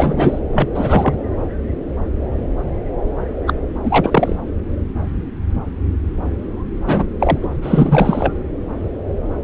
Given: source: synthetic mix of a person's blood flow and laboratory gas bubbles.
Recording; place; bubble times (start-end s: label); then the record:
Doppler ultrasound of blood flow; subclavian vein
0.00-0.39 s: bubbles
0.53-0.68 s: bubbles
0.74-1.15 s: bubbles
3.46-3.53 s: bubbles
3.83-4.36 s: bubbles
6.86-7.06 s: bubbles
7.19-7.38 s: bubbles
7.42-7.48 s: bubbles
7.62-8.33 s: bubbles
From the record:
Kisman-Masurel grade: 233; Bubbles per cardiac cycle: several, 3 to 8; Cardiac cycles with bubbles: 50 to 99%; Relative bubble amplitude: loud (0.450 to 0.775); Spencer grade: 3 (all of the cardiac periods contain showers or single bubble signals, but not dominating or overriding the cardiac motion signals); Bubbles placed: anywhere in the cardiac cycle